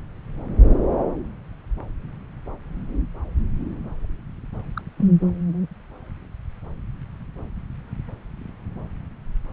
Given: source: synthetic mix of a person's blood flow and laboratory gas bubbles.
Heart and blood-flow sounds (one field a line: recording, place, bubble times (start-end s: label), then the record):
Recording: Doppler ultrasound of blood flow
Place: subclavian vein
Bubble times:
0.98-1.04 s: bubbles
4.75-4.82 s: bubbles
4.98-5.21 s: bubbles
From the record:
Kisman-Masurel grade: 121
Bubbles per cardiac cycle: 1 to 2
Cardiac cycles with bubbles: 10 to 50%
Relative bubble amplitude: barely perceptible (0.100 to 0.250)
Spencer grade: 2 (many but less than half of the cardiac periods contain bubble signals, singularly or in groups)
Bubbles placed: anywhere in the cardiac cycle